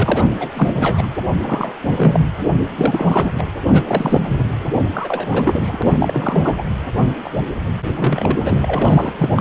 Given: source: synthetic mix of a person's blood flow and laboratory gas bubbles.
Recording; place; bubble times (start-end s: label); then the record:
Doppler ultrasound of blood flow; precordium
0.00-0.48 s: bubbles
0.54-1.07 s: bubbles
1.39-1.75 s: bubbles
1.87-2.19 s: bubbles
2.75-3.33 s: bubbles
3.38-3.45 s: bubbles
3.72-4.54 s: bubbles
4.94-5.79 s: bubbles
5.82-5.97 s: bubbles
6.00-6.64 s: bubbles
7.24-7.30 s: bubbles
7.84-8.57 s: bubbles
8.62-9.13 s: bubbles
9.19-9.41 s: bubbles
From the record:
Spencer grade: 3 (all of the cardiac periods contain showers or single bubble signals, but not dominating or overriding the cardiac motion signals); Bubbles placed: anywhere in the cardiac cycle